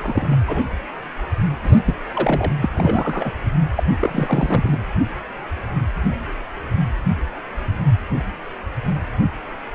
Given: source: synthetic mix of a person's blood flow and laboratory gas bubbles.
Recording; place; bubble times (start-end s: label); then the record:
Doppler ultrasound of blood flow; precordium
0.00-0.39 s: bubbles
0.47-0.63 s: bubbles
1.63-1.80 s: bubbles
1.85-1.94 s: bubbles
2.15-2.52 s: bubbles
2.61-2.69 s: bubbles
2.74-3.33 s: bubbles
3.76-3.83 s: bubbles
4.00-4.78 s: bubbles
From the record:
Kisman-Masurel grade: 222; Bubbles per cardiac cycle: several, 3 to 8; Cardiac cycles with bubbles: 10 to 50%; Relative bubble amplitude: moderate (0.250 to 0.450); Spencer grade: 2 (many but less than half of the cardiac periods contain bubble signals, singularly or in groups); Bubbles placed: anywhere in the cardiac cycle